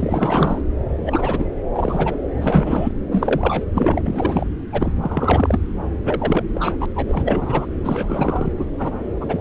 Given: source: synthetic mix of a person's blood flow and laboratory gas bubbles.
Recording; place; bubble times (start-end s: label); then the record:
Doppler ultrasound of blood flow; subclavian vein
0.00-0.61 s: bubbles
1.06-1.46 s: bubbles
1.73-2.19 s: bubbles
2.34-2.92 s: bubbles
3.12-3.65 s: bubbles
3.74-4.02 s: bubbles
4.06-4.47 s: bubbles
4.72-4.95 s: bubbles
5.02-5.60 s: bubbles
6.05-6.44 s: bubbles
6.55-6.77 s: bubbles
6.80-6.86 s: bubbles
6.96-7.66 s: bubbles
7.80-8.54 s: bubbles
8.56-8.66 s: bubbles
8.78-8.92 s: bubbles
9.21-9.41 s: bubbles
From the record:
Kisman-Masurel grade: 343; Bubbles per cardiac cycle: rolling drumbeat, 9 or more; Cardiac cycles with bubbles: 100%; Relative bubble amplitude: loud (0.450 to 0.775); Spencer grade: 3 (all of the cardiac periods contain showers or single bubble signals, but not dominating or overriding the cardiac motion signals); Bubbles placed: anywhere in the cardiac cycle